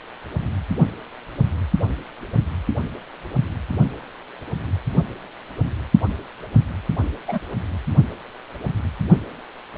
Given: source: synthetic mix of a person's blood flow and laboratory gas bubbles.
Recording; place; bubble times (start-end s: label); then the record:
Doppler ultrasound of blood flow; precordium
7.27-7.39 s: bubbles
From the record:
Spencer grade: 1 (occasional bubble signal discernible with the cardiac motion signal, with majority of cardiac periods free of bubbles); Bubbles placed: only in the low amplitude regions of the cardiac cycle